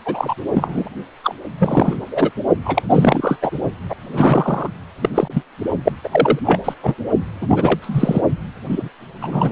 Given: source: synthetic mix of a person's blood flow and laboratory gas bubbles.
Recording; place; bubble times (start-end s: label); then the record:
Doppler ultrasound of blood flow; precordium
0.05-0.34 s: bubbles
0.53-0.89 s: bubbles
1.24-1.34 s: bubbles
1.58-1.96 s: bubbles
2.10-2.31 s: bubbles
2.65-2.83 s: bubbles
2.90-3.36 s: bubbles
3.42-3.50 s: bubbles
3.89-3.95 s: bubbles
4.11-4.70 s: bubbles
5.02-5.09 s: bubbles
5.14-5.28 s: bubbles
5.33-5.42 s: bubbles
5.84-5.92 s: bubbles
6.03-6.08 s: bubbles
6.11-6.39 s: bubbles
6.45-6.59 s: bubbles
6.64-6.74 s: bubbles
6.82-6.95 s: bubbles
7.41-8.21 s: bubbles
8.64-8.89 s: bubbles
9.21-9.52 s: bubbles
From the record:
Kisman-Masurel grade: 343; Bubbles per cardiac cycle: rolling drumbeat, 9 or more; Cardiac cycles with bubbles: 100%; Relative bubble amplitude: loud (0.450 to 0.775); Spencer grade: 3 (all of the cardiac periods contain showers or single bubble signals, but not dominating or overriding the cardiac motion signals); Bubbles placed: only in the low amplitude regions of the cardiac cycle